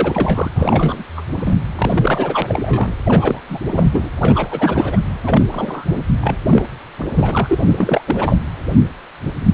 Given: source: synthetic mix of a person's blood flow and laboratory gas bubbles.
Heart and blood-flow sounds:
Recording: Doppler ultrasound of blood flow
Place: precordium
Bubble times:
0.00-0.51 s: bubbles
0.55-1.03 s: bubbles
1.16-1.21 s: bubbles
1.35-1.56 s: bubbles
1.75-2.95 s: bubbles
3.06-3.42 s: bubbles
3.48-3.60 s: bubbles
3.67-3.90 s: bubbles
3.92-4.10 s: bubbles
4.19-5.00 s: bubbles
5.23-5.46 s: bubbles
5.52-6.03 s: bubbles
6.20-6.36 s: bubbles
6.49-6.65 s: bubbles
6.98-8.01 s: bubbles
8.06-8.38 s: bubbles
From the record:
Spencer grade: 3 (all of the cardiac periods contain showers or single bubble signals, but not dominating or overriding the cardiac motion signals)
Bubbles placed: anywhere in the cardiac cycle

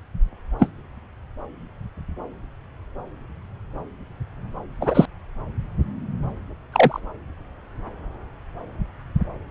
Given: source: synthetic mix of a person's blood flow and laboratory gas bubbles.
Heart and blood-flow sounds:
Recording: Doppler ultrasound of blood flow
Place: subclavian vein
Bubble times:
0.59-0.70 s: bubbles
4.81-5.06 s: bubbles
6.72-7.00 s: bubbles
From the record:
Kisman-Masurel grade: 123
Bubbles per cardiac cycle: 1 to 2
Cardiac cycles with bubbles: 10 to 50%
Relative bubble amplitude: loud (0.450 to 0.775)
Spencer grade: 2 (many but less than half of the cardiac periods contain bubble signals, singularly or in groups)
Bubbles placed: anywhere in the cardiac cycle

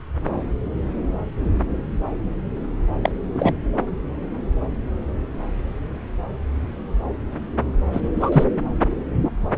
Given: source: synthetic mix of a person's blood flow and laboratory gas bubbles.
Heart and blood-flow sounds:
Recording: Doppler ultrasound of blood flow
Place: subclavian vein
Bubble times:
3.03-3.12 s: bubbles
3.35-3.54 s: bubbles
7.92-8.01 s: bubbles
8.15-8.44 s: bubbles
From the record:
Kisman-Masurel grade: 223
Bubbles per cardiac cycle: several, 3 to 8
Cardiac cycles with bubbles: 10 to 50%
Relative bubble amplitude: loud (0.450 to 0.775)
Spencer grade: 2 (many but less than half of the cardiac periods contain bubble signals, singularly or in groups)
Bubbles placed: anywhere in the cardiac cycle

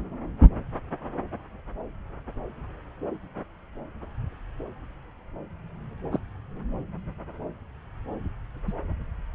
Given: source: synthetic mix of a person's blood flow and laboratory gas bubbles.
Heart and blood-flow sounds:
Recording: Doppler ultrasound of blood flow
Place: subclavian vein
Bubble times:
6.12-6.20 s: bubbles
8.68-8.72 s: bubbles
From the record:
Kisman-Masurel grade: 122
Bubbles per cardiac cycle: 1 to 2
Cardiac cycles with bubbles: 10 to 50%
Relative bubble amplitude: moderate (0.250 to 0.450)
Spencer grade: 2 (many but less than half of the cardiac periods contain bubble signals, singularly or in groups)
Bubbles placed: anywhere in the cardiac cycle

